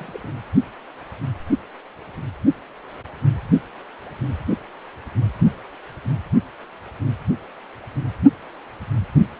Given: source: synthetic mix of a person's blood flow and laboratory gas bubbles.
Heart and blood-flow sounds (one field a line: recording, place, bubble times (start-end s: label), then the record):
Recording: Doppler ultrasound of blood flow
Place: precordium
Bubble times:
0.00-0.20 s: bubbles
0.23-0.30 s: bubbles
From the record:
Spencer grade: 1 (occasional bubble signal discernible with the cardiac motion signal, with majority of cardiac periods free of bubbles)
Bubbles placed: anywhere in the cardiac cycle